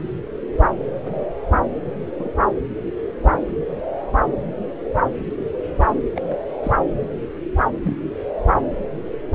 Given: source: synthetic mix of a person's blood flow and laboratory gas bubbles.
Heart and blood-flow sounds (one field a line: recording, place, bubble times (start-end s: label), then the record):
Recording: Doppler ultrasound of blood flow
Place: subclavian vein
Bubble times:
1.02-1.25 s: bubbles
2.18-2.29 s: bubbles
6.15-6.37 s: bubbles
6.63-6.72 s: bubbles
7.82-7.96 s: bubbles
From the record:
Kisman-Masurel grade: 121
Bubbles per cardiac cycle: 1 to 2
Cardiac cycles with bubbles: 10 to 50%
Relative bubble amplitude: barely perceptible (0.100 to 0.250)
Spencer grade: 2 (many but less than half of the cardiac periods contain bubble signals, singularly or in groups)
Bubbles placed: anywhere in the cardiac cycle